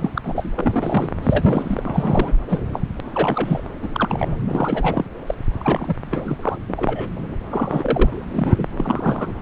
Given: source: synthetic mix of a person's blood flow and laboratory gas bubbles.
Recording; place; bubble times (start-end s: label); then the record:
Doppler ultrasound of blood flow; subclavian vein
0.00-0.10 s: bubbles
0.15-0.53 s: bubbles
0.55-1.10 s: bubbles
1.22-1.83 s: bubbles
1.85-2.36 s: bubbles
2.48-2.60 s: bubbles
2.73-2.81 s: bubbles
3.14-3.63 s: bubbles
3.82-3.87 s: bubbles
3.93-4.36 s: bubbles
4.47-5.05 s: bubbles
5.27-5.35 s: bubbles
5.60-5.97 s: bubbles
6.11-6.37 s: bubbles
6.43-6.56 s: bubbles
6.68-7.10 s: bubbles
7.50-8.11 s: bubbles
8.33-8.67 s: bubbles
8.77-9.34 s: bubbles
From the record:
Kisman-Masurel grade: 242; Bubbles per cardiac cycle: several, 3 to 8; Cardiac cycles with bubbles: 100%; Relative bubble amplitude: moderate (0.250 to 0.450); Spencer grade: 3 (all of the cardiac periods contain showers or single bubble signals, but not dominating or overriding the cardiac motion signals); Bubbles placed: anywhere in the cardiac cycle